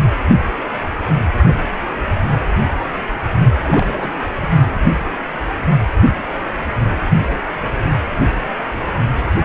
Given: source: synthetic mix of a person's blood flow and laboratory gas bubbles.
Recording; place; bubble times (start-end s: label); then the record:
Doppler ultrasound of blood flow; precordium
3.63-4.12 s: bubbles
4.42-4.46 s: bubbles
From the record:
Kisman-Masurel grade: 221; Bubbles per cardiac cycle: several, 3 to 8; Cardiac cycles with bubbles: 10 to 50%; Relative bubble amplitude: barely perceptible (0.100 to 0.250); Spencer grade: 2 (many but less than half of the cardiac periods contain bubble signals, singularly or in groups); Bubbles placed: only in the low amplitude regions of the cardiac cycle